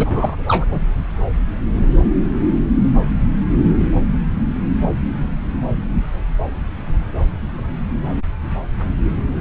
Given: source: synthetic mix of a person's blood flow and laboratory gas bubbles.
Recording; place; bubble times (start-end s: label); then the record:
Doppler ultrasound of blood flow; subclavian vein
0.00-0.36 s: bubbles
0.48-0.65 s: bubbles
0.69-0.82 s: bubbles
From the record:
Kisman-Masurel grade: 212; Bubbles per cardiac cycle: several, 3 to 8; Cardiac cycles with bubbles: 1 to 10%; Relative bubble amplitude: moderate (0.250 to 0.450); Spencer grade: 1 (occasional bubble signal discernible with the cardiac motion signal, with majority of cardiac periods free of bubbles); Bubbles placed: anywhere in the cardiac cycle